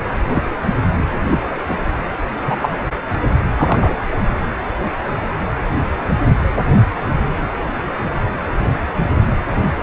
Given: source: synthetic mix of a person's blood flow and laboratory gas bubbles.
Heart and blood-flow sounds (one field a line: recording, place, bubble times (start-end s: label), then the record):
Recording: Doppler ultrasound of blood flow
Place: precordium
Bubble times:
0.33-0.43 s: bubbles
1.31-1.38 s: bubbles
1.69-1.76 s: bubbles
2.46-2.57 s: bubbles
2.62-2.71 s: bubbles
3.58-3.96 s: bubbles
From the record:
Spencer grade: 2 (many but less than half of the cardiac periods contain bubble signals, singularly or in groups)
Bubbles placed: anywhere in the cardiac cycle